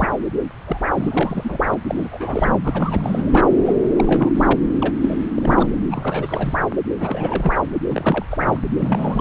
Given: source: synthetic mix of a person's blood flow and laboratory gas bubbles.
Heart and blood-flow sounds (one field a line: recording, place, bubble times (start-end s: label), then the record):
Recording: Doppler ultrasound of blood flow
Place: subclavian vein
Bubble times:
0.00-0.07 s: bubbles
0.67-0.78 s: bubbles
0.93-1.57 s: bubbles
1.71-1.74 s: bubbles
1.88-2.56 s: bubbles
2.64-3.45 s: bubbles
3.65-3.74 s: bubbles
3.95-4.32 s: bubbles
4.34-4.56 s: bubbles
4.82-4.94 s: bubbles
5.00-5.17 s: bubbles
5.36-5.79 s: bubbles
5.91-6.62 s: bubbles
6.99-7.57 s: bubbles
7.88-8.25 s: bubbles
8.30-8.60 s: bubbles
8.79-9.21 s: bubbles
From the record:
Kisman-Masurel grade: 332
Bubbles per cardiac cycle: rolling drumbeat, 9 or more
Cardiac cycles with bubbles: 50 to 99%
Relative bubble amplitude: moderate (0.250 to 0.450)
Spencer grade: 3 (all of the cardiac periods contain showers or single bubble signals, but not dominating or overriding the cardiac motion signals)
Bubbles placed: anywhere in the cardiac cycle